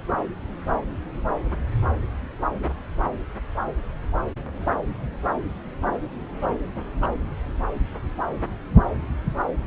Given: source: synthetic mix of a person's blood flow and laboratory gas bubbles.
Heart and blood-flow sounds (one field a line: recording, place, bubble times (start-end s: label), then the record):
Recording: Doppler ultrasound of blood flow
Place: subclavian vein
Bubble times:
7.01-7.08 s: bubbles
From the record:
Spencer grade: 1 (occasional bubble signal discernible with the cardiac motion signal, with majority of cardiac periods free of bubbles)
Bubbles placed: anywhere in the cardiac cycle